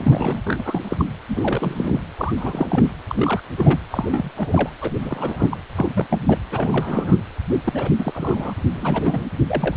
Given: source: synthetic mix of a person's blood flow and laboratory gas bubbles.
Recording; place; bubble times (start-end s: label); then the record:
Doppler ultrasound of blood flow; precordium
0.00-0.42 s: bubbles
0.46-0.62 s: bubbles
0.65-1.05 s: bubbles
1.28-2.00 s: bubbles
2.18-2.90 s: bubbles
3.10-3.43 s: bubbles
3.57-3.80 s: bubbles
3.89-4.30 s: bubbles
4.37-4.70 s: bubbles
4.81-4.91 s: bubbles
5.01-5.58 s: bubbles
5.75-5.90 s: bubbles
5.94-6.07 s: bubbles
6.09-6.25 s: bubbles
6.28-6.38 s: bubbles
6.52-7.21 s: bubbles
7.65-7.91 s: bubbles
7.98-8.54 s: bubbles
8.72-9.26 s: bubbles
9.47-9.77 s: bubbles
From the record:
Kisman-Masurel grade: 342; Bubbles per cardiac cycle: rolling drumbeat, 9 or more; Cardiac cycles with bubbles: 100%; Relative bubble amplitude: moderate (0.250 to 0.450); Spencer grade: 3 (all of the cardiac periods contain showers or single bubble signals, but not dominating or overriding the cardiac motion signals); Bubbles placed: anywhere in the cardiac cycle